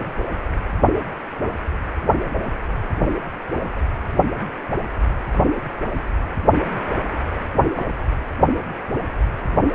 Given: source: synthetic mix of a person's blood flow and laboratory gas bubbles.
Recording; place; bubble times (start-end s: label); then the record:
Doppler ultrasound of blood flow; precordium
7.76-7.83 s: bubbles
From the record:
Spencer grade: 2 (many but less than half of the cardiac periods contain bubble signals, singularly or in groups); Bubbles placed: anywhere in the cardiac cycle